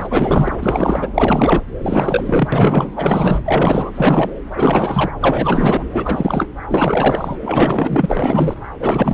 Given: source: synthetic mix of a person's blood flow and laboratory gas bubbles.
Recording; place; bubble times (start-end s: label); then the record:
Doppler ultrasound of blood flow; subclavian vein
0.00-0.53 s: bubbles
0.59-1.12 s: bubbles
1.14-1.63 s: bubbles
1.81-2.48 s: bubbles
2.52-3.42 s: bubbles
3.46-3.91 s: bubbles
3.95-4.35 s: bubbles
4.55-5.12 s: bubbles
5.20-5.83 s: bubbles
5.92-6.46 s: bubbles
6.69-7.37 s: bubbles
7.42-8.54 s: bubbles
8.79-9.14 s: bubbles
From the record:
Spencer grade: 4 (maximum detectable bubble signal sounding continuously throughout systole and diastole of every cardiac period, and overriding the amplitude of the normal cardiac signals); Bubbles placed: anywhere in the cardiac cycle